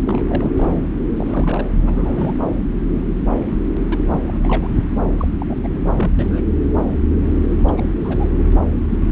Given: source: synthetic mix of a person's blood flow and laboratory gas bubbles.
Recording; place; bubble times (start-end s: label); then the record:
Doppler ultrasound of blood flow; subclavian vein
0.06-0.22 s: bubbles
0.27-0.50 s: bubbles
0.55-0.78 s: bubbles
1.17-1.66 s: bubbles
1.85-2.38 s: bubbles
2.42-2.53 s: bubbles
3.90-3.98 s: bubbles
4.09-4.21 s: bubbles
4.25-4.68 s: bubbles
5.17-5.28 s: bubbles
5.38-5.46 s: bubbles
5.49-5.55 s: bubbles
5.63-5.68 s: bubbles
5.74-5.78 s: bubbles
5.95-6.11 s: bubbles
6.18-6.51 s: bubbles
7.67-7.71 s: bubbles
7.77-7.82 s: bubbles
8.04-8.28 s: bubbles
8.88-9.00 s: bubbles
From the record:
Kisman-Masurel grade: 232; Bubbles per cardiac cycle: several, 3 to 8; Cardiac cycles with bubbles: 50 to 99%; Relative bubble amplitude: moderate (0.250 to 0.450); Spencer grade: 3 (all of the cardiac periods contain showers or single bubble signals, but not dominating or overriding the cardiac motion signals); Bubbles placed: anywhere in the cardiac cycle